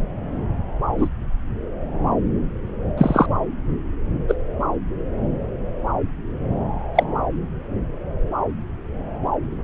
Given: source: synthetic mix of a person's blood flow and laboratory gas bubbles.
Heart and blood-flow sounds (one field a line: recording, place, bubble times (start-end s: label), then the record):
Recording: Doppler ultrasound of blood flow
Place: subclavian vein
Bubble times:
0.97-1.09 s: bubbles
2.98-3.26 s: bubbles
4.28-4.35 s: bubbles
6.95-7.04 s: bubbles
From the record:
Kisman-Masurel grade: 123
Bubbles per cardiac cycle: 1 to 2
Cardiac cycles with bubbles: 10 to 50%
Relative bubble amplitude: loud (0.450 to 0.775)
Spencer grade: 2 (many but less than half of the cardiac periods contain bubble signals, singularly or in groups)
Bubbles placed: anywhere in the cardiac cycle